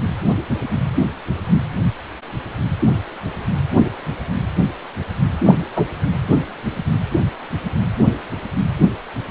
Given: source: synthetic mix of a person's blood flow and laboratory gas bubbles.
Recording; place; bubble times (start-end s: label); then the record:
Doppler ultrasound of blood flow; precordium
5.46-5.59 s: bubbles
5.75-5.85 s: bubbles
From the record:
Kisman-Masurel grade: 113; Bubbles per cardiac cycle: 1 to 2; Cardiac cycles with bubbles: 1 to 10%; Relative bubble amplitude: loud (0.450 to 0.775); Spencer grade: 1 (occasional bubble signal discernible with the cardiac motion signal, with majority of cardiac periods free of bubbles); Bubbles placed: anywhere in the cardiac cycle